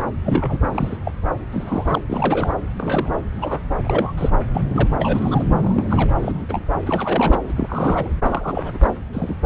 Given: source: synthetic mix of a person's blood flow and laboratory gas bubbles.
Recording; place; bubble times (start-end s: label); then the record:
Doppler ultrasound of blood flow; subclavian vein
0.25-0.58 s: bubbles
0.73-0.97 s: bubbles
1.04-1.11 s: bubbles
1.52-2.02 s: bubbles
2.10-2.52 s: bubbles
2.78-3.10 s: bubbles
3.33-3.62 s: bubbles
3.84-4.12 s: bubbles
4.17-4.30 s: bubbles
4.51-4.95 s: bubbles
4.99-5.44 s: bubbles
5.63-6.12 s: bubbles
6.20-6.46 s: bubbles
6.49-6.67 s: bubbles
6.86-7.38 s: bubbles
7.48-8.09 s: bubbles
8.21-8.79 s: bubbles
8.84-8.93 s: bubbles
9.12-9.35 s: bubbles
From the record:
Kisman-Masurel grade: 232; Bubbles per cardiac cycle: several, 3 to 8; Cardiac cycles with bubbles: 50 to 99%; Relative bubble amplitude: moderate (0.250 to 0.450); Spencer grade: 3 (all of the cardiac periods contain showers or single bubble signals, but not dominating or overriding the cardiac motion signals); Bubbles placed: anywhere in the cardiac cycle